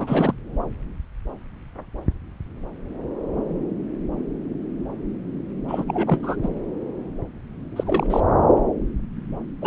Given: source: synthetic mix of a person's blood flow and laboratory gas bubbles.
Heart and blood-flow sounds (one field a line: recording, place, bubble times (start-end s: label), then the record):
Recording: Doppler ultrasound of blood flow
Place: subclavian vein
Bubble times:
0.00-0.33 s: bubbles
5.68-5.84 s: bubbles
5.88-6.20 s: bubbles
6.22-6.36 s: bubbles
6.42-6.49 s: bubbles
7.76-8.20 s: bubbles
9.62-9.66 s: bubbles
From the record:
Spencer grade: 2 (many but less than half of the cardiac periods contain bubble signals, singularly or in groups)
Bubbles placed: anywhere in the cardiac cycle